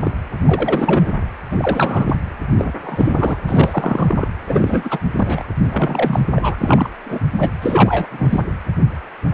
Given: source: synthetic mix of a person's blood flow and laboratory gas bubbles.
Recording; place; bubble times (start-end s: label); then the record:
Doppler ultrasound of blood flow; precordium
0.00-0.11 s: bubbles
0.42-1.12 s: bubbles
1.50-2.15 s: bubbles
2.56-2.71 s: bubbles
2.81-3.42 s: bubbles
3.48-4.28 s: bubbles
4.46-4.99 s: bubbles
5.17-5.43 s: bubbles
5.62-6.23 s: bubbles
6.36-6.88 s: bubbles
7.05-7.19 s: bubbles
7.33-7.50 s: bubbles
7.62-8.07 s: bubbles
8.11-8.52 s: bubbles
From the record:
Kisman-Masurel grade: 333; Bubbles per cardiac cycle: rolling drumbeat, 9 or more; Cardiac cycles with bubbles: 50 to 99%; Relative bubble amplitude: loud (0.450 to 0.775); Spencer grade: 3 (all of the cardiac periods contain showers or single bubble signals, but not dominating or overriding the cardiac motion signals); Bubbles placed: anywhere in the cardiac cycle